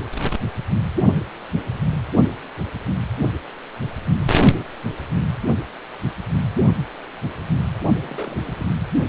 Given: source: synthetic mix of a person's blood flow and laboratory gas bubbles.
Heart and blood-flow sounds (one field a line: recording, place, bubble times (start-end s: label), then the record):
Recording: Doppler ultrasound of blood flow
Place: precordium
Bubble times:
7.94-8.37 s: bubbles
8.44-8.66 s: bubbles
From the record:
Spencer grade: 1 (occasional bubble signal discernible with the cardiac motion signal, with majority of cardiac periods free of bubbles)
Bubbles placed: anywhere in the cardiac cycle